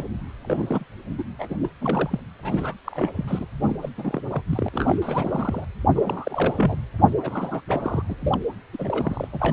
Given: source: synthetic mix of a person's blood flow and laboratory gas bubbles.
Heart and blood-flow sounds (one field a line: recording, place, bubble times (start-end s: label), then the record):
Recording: Doppler ultrasound of blood flow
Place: precordium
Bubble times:
0.00-0.04 s: bubbles
0.44-0.84 s: bubbles
1.18-1.24 s: bubbles
1.39-1.56 s: bubbles
1.61-1.69 s: bubbles
1.80-2.19 s: bubbles
2.42-2.74 s: bubbles
2.84-3.13 s: bubbles
3.17-3.46 s: bubbles
3.60-3.77 s: bubbles
3.82-3.89 s: bubbles
3.97-4.23 s: bubbles
4.32-4.43 s: bubbles
4.50-4.69 s: bubbles
4.72-4.99 s: bubbles
5.02-5.65 s: bubbles
5.95-6.76 s: bubbles
7.18-7.61 s: bubbles
7.68-8.02 s: bubbles
8.09-8.16 s: bubbles
8.21-8.41 s: bubbles
8.72-9.28 s: bubbles
9.33-9.53 s: bubbles
From the record:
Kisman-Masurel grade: 342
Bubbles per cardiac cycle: rolling drumbeat, 9 or more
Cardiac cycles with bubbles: 100%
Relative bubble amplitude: moderate (0.250 to 0.450)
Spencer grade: 3 (all of the cardiac periods contain showers or single bubble signals, but not dominating or overriding the cardiac motion signals)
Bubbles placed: anywhere in the cardiac cycle